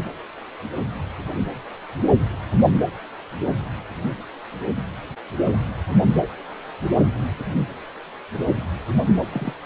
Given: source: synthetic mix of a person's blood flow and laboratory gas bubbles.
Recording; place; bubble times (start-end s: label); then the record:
Doppler ultrasound of blood flow; precordium
9.32-9.53 s: bubbles
From the record:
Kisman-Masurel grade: 111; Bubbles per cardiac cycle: 1 to 2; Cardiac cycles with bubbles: 1 to 10%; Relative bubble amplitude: barely perceptible (0.100 to 0.250); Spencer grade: 1 (occasional bubble signal discernible with the cardiac motion signal, with majority of cardiac periods free of bubbles); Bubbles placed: anywhere in the cardiac cycle